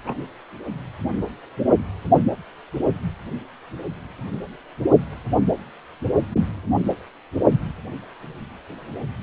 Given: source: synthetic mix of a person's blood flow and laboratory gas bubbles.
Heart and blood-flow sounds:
Doppler ultrasound of blood flow; precordium
0.04-0.18 s: bubbles
From the record:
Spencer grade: 1 (occasional bubble signal discernible with the cardiac motion signal, with majority of cardiac periods free of bubbles); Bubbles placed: only in the low amplitude regions of the cardiac cycle

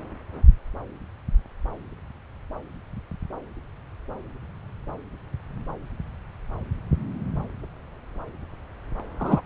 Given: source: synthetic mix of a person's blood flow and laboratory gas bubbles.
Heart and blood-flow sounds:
Doppler ultrasound of blood flow; subclavian vein
9.20-9.42 s: bubbles
From the record:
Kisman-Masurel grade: 123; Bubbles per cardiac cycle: 1 to 2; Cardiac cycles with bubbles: 10 to 50%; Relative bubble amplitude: loud (0.450 to 0.775); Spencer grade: 2 (many but less than half of the cardiac periods contain bubble signals, singularly or in groups); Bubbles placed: anywhere in the cardiac cycle

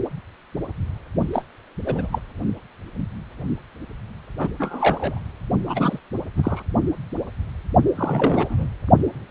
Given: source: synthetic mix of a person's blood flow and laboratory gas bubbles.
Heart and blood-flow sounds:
Doppler ultrasound of blood flow; precordium
1.33-1.43 s: bubbles
1.86-2.08 s: bubbles
2.12-2.19 s: bubbles
4.38-4.49 s: bubbles
4.59-5.21 s: bubbles
5.66-5.99 s: bubbles
6.13-6.18 s: bubbles
6.37-6.62 s: bubbles
7.95-8.67 s: bubbles
From the record:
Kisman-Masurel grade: 232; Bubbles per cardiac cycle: several, 3 to 8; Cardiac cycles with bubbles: 50 to 99%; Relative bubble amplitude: moderate (0.250 to 0.450); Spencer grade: 3 (all of the cardiac periods contain showers or single bubble signals, but not dominating or overriding the cardiac motion signals); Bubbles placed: only in the low amplitude regions of the cardiac cycle

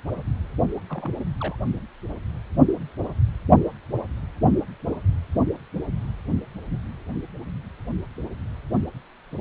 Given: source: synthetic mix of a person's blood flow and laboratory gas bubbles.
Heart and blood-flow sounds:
Doppler ultrasound of blood flow; precordium
0.89-1.10 s: bubbles
1.40-1.56 s: bubbles
From the record:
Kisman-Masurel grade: 211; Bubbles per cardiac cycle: several, 3 to 8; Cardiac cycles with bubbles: 1 to 10%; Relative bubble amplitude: barely perceptible (0.100 to 0.250); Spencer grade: 1 (occasional bubble signal discernible with the cardiac motion signal, with majority of cardiac periods free of bubbles); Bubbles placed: only in the low amplitude regions of the cardiac cycle

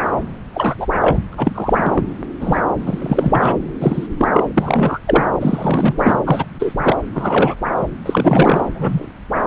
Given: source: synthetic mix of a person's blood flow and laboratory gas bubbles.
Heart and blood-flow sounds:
Doppler ultrasound of blood flow; subclavian vein
0.00-0.08 s: bubbles
0.54-0.87 s: bubbles
0.99-1.18 s: bubbles
1.33-2.04 s: bubbles
2.40-2.62 s: bubbles
2.80-3.57 s: bubbles
3.81-4.07 s: bubbles
4.18-4.30 s: bubbles
4.33-4.53 s: bubbles
4.56-4.99 s: bubbles
5.07-5.24 s: bubbles
5.40-6.16 s: bubbles
6.24-6.45 s: bubbles
6.58-6.74 s: bubbles
6.77-6.96 s: bubbles
7.14-7.55 s: bubbles
8.05-8.63 s: bubbles
8.75-9.07 s: bubbles
9.34-9.40 s: bubbles
From the record:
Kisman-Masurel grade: 243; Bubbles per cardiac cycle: several, 3 to 8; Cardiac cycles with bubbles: 100%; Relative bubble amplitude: loud (0.450 to 0.775); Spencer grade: 3 (all of the cardiac periods contain showers or single bubble signals, but not dominating or overriding the cardiac motion signals); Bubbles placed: anywhere in the cardiac cycle

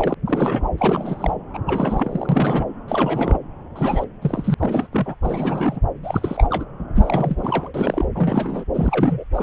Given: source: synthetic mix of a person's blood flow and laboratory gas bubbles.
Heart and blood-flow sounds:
Doppler ultrasound of blood flow; subclavian vein
0.00-0.15 s: bubbles
0.26-0.70 s: bubbles
0.78-1.35 s: bubbles
1.54-1.58 s: bubbles
1.66-2.66 s: bubbles
2.88-3.39 s: bubbles
3.75-4.04 s: bubbles
4.21-4.54 s: bubbles
4.58-4.88 s: bubbles
4.92-5.15 s: bubbles
5.21-5.79 s: bubbles
6.03-6.65 s: bubbles
6.95-8.05 s: bubbles
8.14-8.64 s: bubbles
8.74-9.24 s: bubbles
9.32-9.43 s: bubbles
From the record:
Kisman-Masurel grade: 332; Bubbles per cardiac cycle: rolling drumbeat, 9 or more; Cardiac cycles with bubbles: 50 to 99%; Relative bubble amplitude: moderate (0.250 to 0.450); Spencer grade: 3 (all of the cardiac periods contain showers or single bubble signals, but not dominating or overriding the cardiac motion signals); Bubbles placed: anywhere in the cardiac cycle

